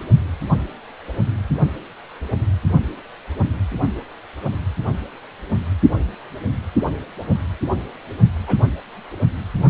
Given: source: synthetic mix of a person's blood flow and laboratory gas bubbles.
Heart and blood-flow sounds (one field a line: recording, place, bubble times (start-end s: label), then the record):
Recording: Doppler ultrasound of blood flow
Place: precordium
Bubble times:
8.47-8.58 s: bubbles
From the record:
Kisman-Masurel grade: 111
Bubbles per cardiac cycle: 1 to 2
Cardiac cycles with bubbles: 1 to 10%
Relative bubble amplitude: barely perceptible (0.100 to 0.250)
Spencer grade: 1 (occasional bubble signal discernible with the cardiac motion signal, with majority of cardiac periods free of bubbles)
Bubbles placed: only in the low amplitude regions of the cardiac cycle